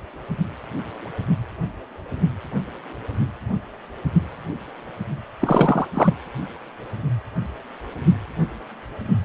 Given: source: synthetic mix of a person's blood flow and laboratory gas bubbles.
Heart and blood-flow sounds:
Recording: Doppler ultrasound of blood flow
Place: precordium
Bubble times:
5.40-5.88 s: bubbles
5.94-6.14 s: bubbles
From the record:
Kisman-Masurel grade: 213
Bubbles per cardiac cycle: several, 3 to 8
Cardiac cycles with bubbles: 1 to 10%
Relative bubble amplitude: loud (0.450 to 0.775)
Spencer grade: 1 (occasional bubble signal discernible with the cardiac motion signal, with majority of cardiac periods free of bubbles)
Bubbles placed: anywhere in the cardiac cycle

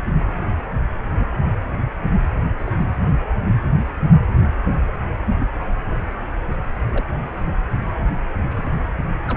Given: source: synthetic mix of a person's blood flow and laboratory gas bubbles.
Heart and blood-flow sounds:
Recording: Doppler ultrasound of blood flow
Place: precordium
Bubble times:
0.08-0.17 s: bubbles
1.19-1.27 s: bubbles
2.58-2.78 s: bubbles
5.40-5.46 s: bubbles
6.89-7.04 s: bubbles
8.49-8.80 s: bubbles
9.26-9.36 s: bubbles
From the record:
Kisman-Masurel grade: 121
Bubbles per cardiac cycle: 1 to 2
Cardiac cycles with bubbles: 10 to 50%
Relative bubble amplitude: barely perceptible (0.100 to 0.250)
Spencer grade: 2 (many but less than half of the cardiac periods contain bubble signals, singularly or in groups)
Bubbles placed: anywhere in the cardiac cycle

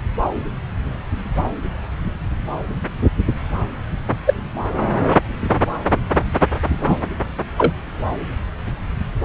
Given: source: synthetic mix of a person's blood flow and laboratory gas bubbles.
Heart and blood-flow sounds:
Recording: Doppler ultrasound of blood flow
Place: subclavian vein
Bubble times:
4.25-4.34 s: bubbles
6.78-6.96 s: bubbles
7.57-7.73 s: bubbles
From the record:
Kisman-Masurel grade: 123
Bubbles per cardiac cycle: 1 to 2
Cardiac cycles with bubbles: 10 to 50%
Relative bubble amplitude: loud (0.450 to 0.775)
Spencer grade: 2 (many but less than half of the cardiac periods contain bubble signals, singularly or in groups)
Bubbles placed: anywhere in the cardiac cycle

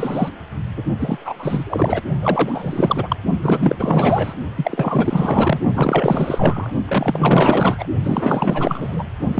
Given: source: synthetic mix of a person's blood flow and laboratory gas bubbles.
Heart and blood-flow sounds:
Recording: Doppler ultrasound of blood flow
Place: precordium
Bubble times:
0.00-0.29 s: bubbles
0.77-0.82 s: bubbles
0.99-2.01 s: bubbles
2.21-3.16 s: bubbles
3.40-4.33 s: bubbles
4.56-5.60 s: bubbles
5.73-6.70 s: bubbles
6.88-7.87 s: bubbles
8.04-9.04 s: bubbles
9.34-9.40 s: bubbles
From the record:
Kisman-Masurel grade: 444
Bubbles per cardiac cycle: continuous sound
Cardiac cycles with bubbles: 100%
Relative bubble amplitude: maximal (0.775 to 0.999)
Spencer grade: 4 (maximum detectable bubble signal sounding continuously throughout systole and diastole of every cardiac period, and overriding the amplitude of the normal cardiac signals)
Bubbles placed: only in the low amplitude regions of the cardiac cycle

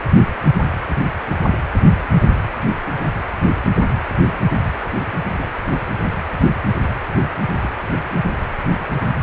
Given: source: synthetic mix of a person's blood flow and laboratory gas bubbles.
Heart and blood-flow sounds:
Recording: Doppler ultrasound of blood flow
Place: precordium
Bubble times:
2.10-2.27 s: bubbles
2.92-3.13 s: bubbles
5.27-5.51 s: bubbles
7.61-7.69 s: bubbles
From the record:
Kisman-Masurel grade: 121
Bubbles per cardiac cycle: 1 to 2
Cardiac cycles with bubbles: 10 to 50%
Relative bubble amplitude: barely perceptible (0.100 to 0.250)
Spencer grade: 2 (many but less than half of the cardiac periods contain bubble signals, singularly or in groups)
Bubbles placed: anywhere in the cardiac cycle

